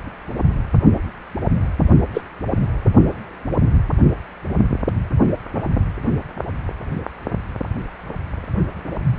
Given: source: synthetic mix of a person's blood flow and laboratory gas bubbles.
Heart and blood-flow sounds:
Doppler ultrasound of blood flow; precordium
2.13-2.21 s: bubbles
2.55-2.77 s: bubbles
From the record:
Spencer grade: 1 (occasional bubble signal discernible with the cardiac motion signal, with majority of cardiac periods free of bubbles); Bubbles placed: anywhere in the cardiac cycle

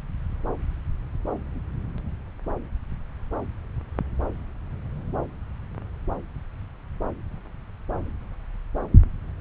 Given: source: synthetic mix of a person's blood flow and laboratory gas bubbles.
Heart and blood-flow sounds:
Doppler ultrasound of blood flow; subclavian vein
no bubbles
From the record:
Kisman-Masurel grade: 000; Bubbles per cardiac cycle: 0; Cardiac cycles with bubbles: 0%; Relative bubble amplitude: no bubbles discernible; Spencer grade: 0 (complete lack of bubble signals)

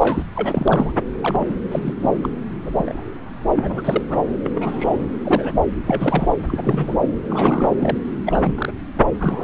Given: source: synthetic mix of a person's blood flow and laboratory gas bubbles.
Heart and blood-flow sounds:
Doppler ultrasound of blood flow; subclavian vein
0.00-0.24 s: bubbles
0.35-0.93 s: bubbles
1.22-1.56 s: bubbles
1.71-1.94 s: bubbles
2.00-2.10 s: bubbles
2.22-2.29 s: bubbles
2.65-2.71 s: bubbles
2.74-3.03 s: bubbles
3.56-4.03 s: bubbles
4.10-4.27 s: bubbles
4.45-4.50 s: bubbles
4.55-5.06 s: bubbles
5.21-5.55 s: bubbles
5.86-6.33 s: bubbles
6.48-6.96 s: bubbles
7.24-7.77 s: bubbles
7.79-7.97 s: bubbles
8.26-8.72 s: bubbles
9.19-9.44 s: bubbles
From the record:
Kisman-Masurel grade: 242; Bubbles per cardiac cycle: several, 3 to 8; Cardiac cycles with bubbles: 100%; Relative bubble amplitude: moderate (0.250 to 0.450); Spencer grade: 3 (all of the cardiac periods contain showers or single bubble signals, but not dominating or overriding the cardiac motion signals); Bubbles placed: anywhere in the cardiac cycle

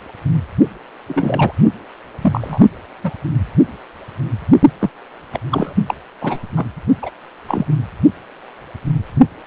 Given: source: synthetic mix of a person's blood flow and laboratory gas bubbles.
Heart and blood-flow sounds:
Doppler ultrasound of blood flow; precordium
1.08-1.53 s: bubbles
2.21-2.67 s: bubbles
3.04-3.11 s: bubbles
4.79-4.89 s: bubbles
5.33-5.39 s: bubbles
5.50-5.73 s: bubbles
5.88-5.94 s: bubbles
6.20-6.38 s: bubbles
6.56-6.66 s: bubbles
7.02-7.11 s: bubbles
7.47-7.66 s: bubbles
From the record:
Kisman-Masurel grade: 233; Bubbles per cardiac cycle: several, 3 to 8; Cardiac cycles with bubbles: 50 to 99%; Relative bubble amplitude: loud (0.450 to 0.775); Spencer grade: 3 (all of the cardiac periods contain showers or single bubble signals, but not dominating or overriding the cardiac motion signals); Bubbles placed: only in the low amplitude regions of the cardiac cycle

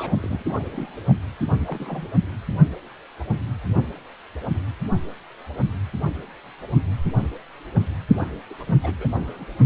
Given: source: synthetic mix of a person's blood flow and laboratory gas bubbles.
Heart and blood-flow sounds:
Doppler ultrasound of blood flow; precordium
0.00-0.16 s: bubbles
0.19-0.44 s: bubbles
0.48-0.69 s: bubbles
0.72-0.92 s: bubbles
1.06-1.15 s: bubbles
1.58-2.07 s: bubbles
8.20-8.30 s: bubbles
8.50-8.55 s: bubbles
8.60-8.63 s: bubbles
8.67-8.78 s: bubbles
8.82-8.95 s: bubbles
8.99-9.08 s: bubbles
9.12-9.45 s: bubbles
From the record:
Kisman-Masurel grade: 221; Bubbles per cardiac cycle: several, 3 to 8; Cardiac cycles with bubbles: 10 to 50%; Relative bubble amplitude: barely perceptible (0.100 to 0.250); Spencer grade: 2 (many but less than half of the cardiac periods contain bubble signals, singularly or in groups); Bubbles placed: anywhere in the cardiac cycle

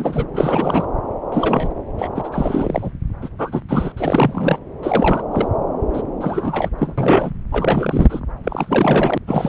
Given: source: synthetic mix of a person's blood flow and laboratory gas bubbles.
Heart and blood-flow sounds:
Doppler ultrasound of blood flow; subclavian vein
0.00-0.27 s: bubbles
0.34-0.84 s: bubbles
1.32-1.68 s: bubbles
1.97-2.09 s: bubbles
2.14-2.29 s: bubbles
2.32-2.92 s: bubbles
3.21-3.29 s: bubbles
3.38-3.61 s: bubbles
3.68-3.92 s: bubbles
3.97-4.58 s: bubbles
4.83-5.24 s: bubbles
5.31-5.49 s: bubbles
5.93-6.02 s: bubbles
6.21-6.70 s: bubbles
6.78-7.31 s: bubbles
7.52-8.21 s: bubbles
8.44-9.18 s: bubbles
9.27-9.48 s: bubbles
From the record:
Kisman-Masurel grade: 343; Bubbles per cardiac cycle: rolling drumbeat, 9 or more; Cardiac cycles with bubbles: 100%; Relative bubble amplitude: loud (0.450 to 0.775); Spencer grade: 3 (all of the cardiac periods contain showers or single bubble signals, but not dominating or overriding the cardiac motion signals); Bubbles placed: anywhere in the cardiac cycle

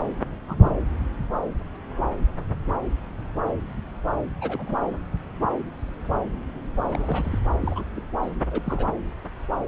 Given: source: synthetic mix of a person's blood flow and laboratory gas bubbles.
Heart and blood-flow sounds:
Doppler ultrasound of blood flow; subclavian vein
0.00-0.02 s: bubbles
0.48-0.80 s: bubbles
4.41-4.76 s: bubbles
4.79-4.97 s: bubbles
6.86-7.39 s: bubbles
7.61-7.85 s: bubbles
7.96-8.01 s: bubbles
8.22-8.30 s: bubbles
8.50-8.62 s: bubbles
8.64-8.88 s: bubbles
From the record:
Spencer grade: 2 (many but less than half of the cardiac periods contain bubble signals, singularly or in groups); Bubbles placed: anywhere in the cardiac cycle

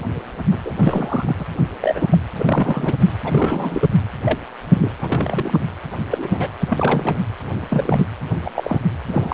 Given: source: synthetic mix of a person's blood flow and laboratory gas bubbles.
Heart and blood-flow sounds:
Doppler ultrasound of blood flow; precordium
0.50-1.35 s: bubbles
1.39-1.44 s: bubbles
1.82-2.07 s: bubbles
2.12-2.18 s: bubbles
2.39-2.94 s: bubbles
3.25-3.89 s: bubbles
4.25-4.38 s: bubbles
4.63-4.92 s: bubbles
5.01-5.58 s: bubbles
6.12-6.48 s: bubbles
6.59-7.19 s: bubbles
7.69-8.06 s: bubbles
8.44-8.50 s: bubbles
8.55-8.80 s: bubbles
9.07-9.34 s: bubbles
From the record:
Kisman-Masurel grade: 242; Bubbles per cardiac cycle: several, 3 to 8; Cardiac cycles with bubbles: 100%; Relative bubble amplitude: moderate (0.250 to 0.450); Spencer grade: 3 (all of the cardiac periods contain showers or single bubble signals, but not dominating or overriding the cardiac motion signals); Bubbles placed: anywhere in the cardiac cycle

